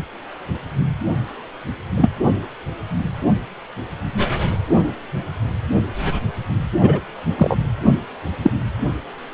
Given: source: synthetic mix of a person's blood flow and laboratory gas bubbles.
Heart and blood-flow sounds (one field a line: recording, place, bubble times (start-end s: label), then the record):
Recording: Doppler ultrasound of blood flow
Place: precordium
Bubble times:
1.97-2.11 s: bubbles
6.79-6.99 s: bubbles
7.37-7.57 s: bubbles
8.43-8.52 s: bubbles
From the record:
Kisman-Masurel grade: 123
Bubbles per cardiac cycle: 1 to 2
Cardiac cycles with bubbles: 10 to 50%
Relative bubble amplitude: loud (0.450 to 0.775)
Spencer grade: 2 (many but less than half of the cardiac periods contain bubble signals, singularly or in groups)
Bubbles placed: anywhere in the cardiac cycle